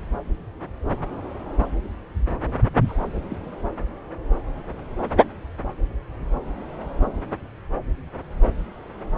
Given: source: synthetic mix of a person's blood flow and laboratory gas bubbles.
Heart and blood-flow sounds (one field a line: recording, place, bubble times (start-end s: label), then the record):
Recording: Doppler ultrasound of blood flow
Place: subclavian vein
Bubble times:
2.87-3.04 s: bubbles
3.30-3.37 s: bubbles
From the record:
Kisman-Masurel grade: 111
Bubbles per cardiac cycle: 1 to 2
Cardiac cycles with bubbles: 1 to 10%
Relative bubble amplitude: barely perceptible (0.100 to 0.250)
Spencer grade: 1 (occasional bubble signal discernible with the cardiac motion signal, with majority of cardiac periods free of bubbles)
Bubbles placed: anywhere in the cardiac cycle